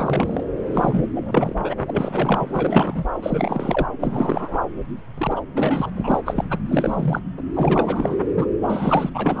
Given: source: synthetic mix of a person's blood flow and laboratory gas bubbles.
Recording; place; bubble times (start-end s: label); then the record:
Doppler ultrasound of blood flow; subclavian vein
0.00-0.44 s: bubbles
0.72-1.04 s: bubbles
1.13-1.55 s: bubbles
1.58-1.75 s: bubbles
1.81-2.47 s: bubbles
2.52-3.04 s: bubbles
3.22-3.86 s: bubbles
4.00-4.59 s: bubbles
5.17-5.41 s: bubbles
5.55-5.90 s: bubbles
5.95-6.21 s: bubbles
6.25-6.45 s: bubbles
6.50-6.58 s: bubbles
6.68-7.21 s: bubbles
7.37-7.42 s: bubbles
7.54-8.17 s: bubbles
8.36-8.46 s: bubbles
8.60-9.10 s: bubbles
9.13-9.40 s: bubbles
From the record:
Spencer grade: 3 (all of the cardiac periods contain showers or single bubble signals, but not dominating or overriding the cardiac motion signals); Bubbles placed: anywhere in the cardiac cycle